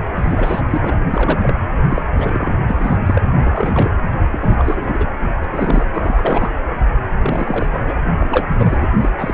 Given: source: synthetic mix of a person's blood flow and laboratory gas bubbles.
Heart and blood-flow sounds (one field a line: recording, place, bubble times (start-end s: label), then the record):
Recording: Doppler ultrasound of blood flow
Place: precordium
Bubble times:
0.15-0.61 s: bubbles
0.70-1.00 s: bubbles
1.13-1.62 s: bubbles
1.89-2.02 s: bubbles
2.16-2.51 s: bubbles
2.67-2.97 s: bubbles
3.06-3.22 s: bubbles
3.39-3.90 s: bubbles
4.31-5.08 s: bubbles
5.44-5.48 s: bubbles
5.52-5.85 s: bubbles
5.94-6.53 s: bubbles
7.21-7.69 s: bubbles
7.71-7.96 s: bubbles
8.18-8.27 s: bubbles
8.31-8.86 s: bubbles
8.92-9.10 s: bubbles
9.19-9.33 s: bubbles
From the record:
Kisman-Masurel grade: 342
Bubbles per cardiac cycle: rolling drumbeat, 9 or more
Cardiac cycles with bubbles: 100%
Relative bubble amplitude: moderate (0.250 to 0.450)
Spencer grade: 3 (all of the cardiac periods contain showers or single bubble signals, but not dominating or overriding the cardiac motion signals)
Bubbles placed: anywhere in the cardiac cycle